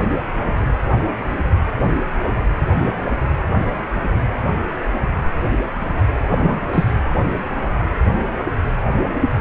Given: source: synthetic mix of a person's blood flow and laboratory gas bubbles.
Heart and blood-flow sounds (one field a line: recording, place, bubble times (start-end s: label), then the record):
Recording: Doppler ultrasound of blood flow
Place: precordium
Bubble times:
6.29-6.60 s: bubbles
6.72-6.93 s: bubbles
From the record:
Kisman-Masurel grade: 113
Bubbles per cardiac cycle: 1 to 2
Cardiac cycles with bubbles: 1 to 10%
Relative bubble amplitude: loud (0.450 to 0.775)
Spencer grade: 1 (occasional bubble signal discernible with the cardiac motion signal, with majority of cardiac periods free of bubbles)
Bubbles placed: anywhere in the cardiac cycle